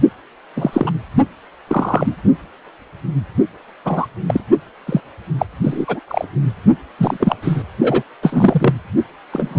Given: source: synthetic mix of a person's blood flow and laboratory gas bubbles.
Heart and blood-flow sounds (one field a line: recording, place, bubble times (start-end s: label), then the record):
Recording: Doppler ultrasound of blood flow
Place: precordium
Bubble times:
0.56-0.92 s: bubbles
1.68-2.16 s: bubbles
3.84-4.07 s: bubbles
4.26-4.41 s: bubbles
4.86-5.00 s: bubbles
5.38-5.46 s: bubbles
5.63-6.00 s: bubbles
6.08-6.25 s: bubbles
6.98-7.17 s: bubbles
7.20-7.36 s: bubbles
7.42-7.63 s: bubbles
7.82-8.03 s: bubbles
8.22-8.73 s: bubbles
9.32-9.59 s: bubbles
From the record:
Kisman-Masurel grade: 243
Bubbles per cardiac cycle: several, 3 to 8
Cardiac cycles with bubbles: 100%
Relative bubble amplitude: loud (0.450 to 0.775)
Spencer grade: 3 (all of the cardiac periods contain showers or single bubble signals, but not dominating or overriding the cardiac motion signals)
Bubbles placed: only in the low amplitude regions of the cardiac cycle